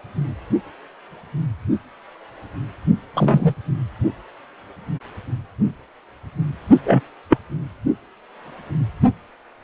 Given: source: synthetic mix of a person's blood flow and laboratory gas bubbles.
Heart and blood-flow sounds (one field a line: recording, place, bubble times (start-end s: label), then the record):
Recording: Doppler ultrasound of blood flow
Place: precordium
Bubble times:
3.14-3.54 s: bubbles
6.84-7.00 s: bubbles
7.29-7.38 s: bubbles
From the record:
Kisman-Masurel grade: 123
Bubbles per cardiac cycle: 1 to 2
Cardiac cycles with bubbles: 10 to 50%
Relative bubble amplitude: loud (0.450 to 0.775)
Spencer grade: 2 (many but less than half of the cardiac periods contain bubble signals, singularly or in groups)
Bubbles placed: only in the low amplitude regions of the cardiac cycle